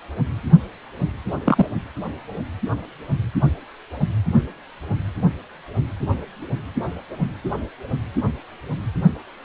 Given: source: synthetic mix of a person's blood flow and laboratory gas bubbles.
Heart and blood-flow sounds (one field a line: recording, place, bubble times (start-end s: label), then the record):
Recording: Doppler ultrasound of blood flow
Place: precordium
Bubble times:
1.45-1.65 s: bubbles
From the record:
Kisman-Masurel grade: 112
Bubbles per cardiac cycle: 1 to 2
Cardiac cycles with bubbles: 1 to 10%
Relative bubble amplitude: moderate (0.250 to 0.450)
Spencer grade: 1 (occasional bubble signal discernible with the cardiac motion signal, with majority of cardiac periods free of bubbles)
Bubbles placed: anywhere in the cardiac cycle